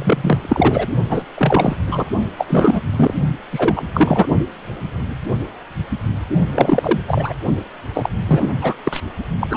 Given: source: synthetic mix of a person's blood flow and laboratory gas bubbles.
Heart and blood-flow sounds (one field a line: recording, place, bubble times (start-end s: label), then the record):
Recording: Doppler ultrasound of blood flow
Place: precordium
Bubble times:
0.00-0.87 s: bubbles
1.09-1.25 s: bubbles
1.37-1.76 s: bubbles
1.91-2.04 s: bubbles
2.38-2.81 s: bubbles
2.92-3.14 s: bubbles
3.52-3.83 s: bubbles
3.94-4.29 s: bubbles
6.53-7.00 s: bubbles
7.08-7.33 s: bubbles
7.93-8.09 s: bubbles
8.28-8.58 s: bubbles
8.61-8.73 s: bubbles
8.84-9.00 s: bubbles
9.40-9.47 s: bubbles
9.50-9.57 s: bubbles
From the record:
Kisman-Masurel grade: 333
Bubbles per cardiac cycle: rolling drumbeat, 9 or more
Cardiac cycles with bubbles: 50 to 99%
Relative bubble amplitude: loud (0.450 to 0.775)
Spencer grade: 3 (all of the cardiac periods contain showers or single bubble signals, but not dominating or overriding the cardiac motion signals)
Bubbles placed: only in the low amplitude regions of the cardiac cycle